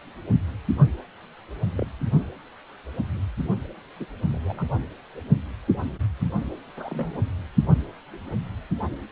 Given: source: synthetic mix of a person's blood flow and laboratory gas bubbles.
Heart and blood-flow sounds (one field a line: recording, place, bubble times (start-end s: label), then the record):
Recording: Doppler ultrasound of blood flow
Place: precordium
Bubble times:
1.76-1.86 s: bubbles
3.99-4.06 s: bubbles
4.29-4.67 s: bubbles
6.77-7.20 s: bubbles
From the record:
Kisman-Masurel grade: 121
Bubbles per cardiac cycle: 1 to 2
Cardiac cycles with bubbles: 10 to 50%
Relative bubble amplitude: barely perceptible (0.100 to 0.250)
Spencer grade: 2 (many but less than half of the cardiac periods contain bubble signals, singularly or in groups)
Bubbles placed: only in the low amplitude regions of the cardiac cycle